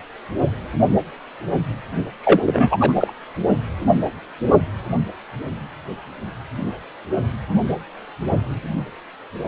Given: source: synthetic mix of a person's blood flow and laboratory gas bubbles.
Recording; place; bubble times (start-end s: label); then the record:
Doppler ultrasound of blood flow; precordium
2.23-2.41 s: bubbles
2.46-2.77 s: bubbles
2.80-2.93 s: bubbles
2.95-3.14 s: bubbles
From the record:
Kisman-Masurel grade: 213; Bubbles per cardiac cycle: several, 3 to 8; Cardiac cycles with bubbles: 1 to 10%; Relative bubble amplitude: loud (0.450 to 0.775); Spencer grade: 1 (occasional bubble signal discernible with the cardiac motion signal, with majority of cardiac periods free of bubbles); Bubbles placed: only in the low amplitude regions of the cardiac cycle